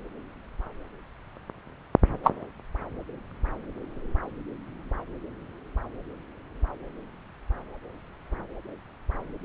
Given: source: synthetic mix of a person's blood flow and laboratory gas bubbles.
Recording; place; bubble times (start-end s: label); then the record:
Doppler ultrasound of blood flow; subclavian vein
2.24-2.30 s: bubbles
From the record:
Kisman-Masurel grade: 112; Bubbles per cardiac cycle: 1 to 2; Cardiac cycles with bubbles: 1 to 10%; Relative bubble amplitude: moderate (0.250 to 0.450); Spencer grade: 1 (occasional bubble signal discernible with the cardiac motion signal, with majority of cardiac periods free of bubbles); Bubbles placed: anywhere in the cardiac cycle